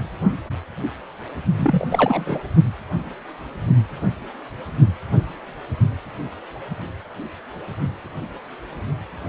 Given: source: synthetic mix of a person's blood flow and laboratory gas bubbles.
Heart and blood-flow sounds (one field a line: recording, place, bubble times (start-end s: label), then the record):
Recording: Doppler ultrasound of blood flow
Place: precordium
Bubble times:
1.57-1.85 s: bubbles
1.91-2.42 s: bubbles
From the record:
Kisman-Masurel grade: 222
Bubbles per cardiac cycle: several, 3 to 8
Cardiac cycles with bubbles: 10 to 50%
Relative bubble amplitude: moderate (0.250 to 0.450)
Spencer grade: 2 (many but less than half of the cardiac periods contain bubble signals, singularly or in groups)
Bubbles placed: only in the low amplitude regions of the cardiac cycle